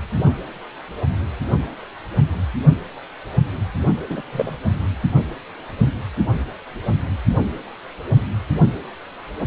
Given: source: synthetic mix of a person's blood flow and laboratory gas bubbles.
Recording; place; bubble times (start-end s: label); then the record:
Doppler ultrasound of blood flow; precordium
4.09-4.22 s: bubbles
4.32-4.56 s: bubbles
From the record:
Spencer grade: 2 (many but less than half of the cardiac periods contain bubble signals, singularly or in groups); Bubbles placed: only in the low amplitude regions of the cardiac cycle